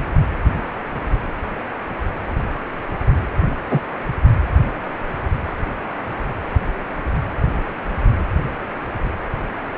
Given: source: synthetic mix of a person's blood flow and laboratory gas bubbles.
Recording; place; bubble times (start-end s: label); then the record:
Doppler ultrasound of blood flow; precordium
3.70-3.80 s: bubbles
From the record:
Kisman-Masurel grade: 113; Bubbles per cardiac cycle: 1 to 2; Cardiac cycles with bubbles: 1 to 10%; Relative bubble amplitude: loud (0.450 to 0.775); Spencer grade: 1 (occasional bubble signal discernible with the cardiac motion signal, with majority of cardiac periods free of bubbles); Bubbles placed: anywhere in the cardiac cycle